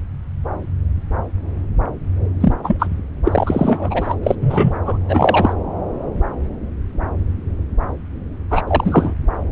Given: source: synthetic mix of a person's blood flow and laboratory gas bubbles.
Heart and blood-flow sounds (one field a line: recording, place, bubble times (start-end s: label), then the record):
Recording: Doppler ultrasound of blood flow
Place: subclavian vein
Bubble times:
2.40-2.53 s: bubbles
2.64-2.87 s: bubbles
3.25-4.16 s: bubbles
4.23-4.35 s: bubbles
4.39-4.74 s: bubbles
4.85-4.98 s: bubbles
5.08-5.53 s: bubbles
8.51-8.62 s: bubbles
8.67-9.14 s: bubbles
From the record:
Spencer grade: 2 (many but less than half of the cardiac periods contain bubble signals, singularly or in groups)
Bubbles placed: anywhere in the cardiac cycle